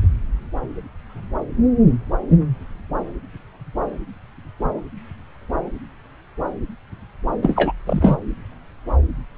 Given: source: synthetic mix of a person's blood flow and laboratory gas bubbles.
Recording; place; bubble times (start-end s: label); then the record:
Doppler ultrasound of blood flow; subclavian vein
7.42-7.73 s: bubbles
7.87-8.17 s: bubbles
From the record:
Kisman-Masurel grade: 223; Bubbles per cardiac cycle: several, 3 to 8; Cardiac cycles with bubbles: 10 to 50%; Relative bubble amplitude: loud (0.450 to 0.775); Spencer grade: 2 (many but less than half of the cardiac periods contain bubble signals, singularly or in groups); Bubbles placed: anywhere in the cardiac cycle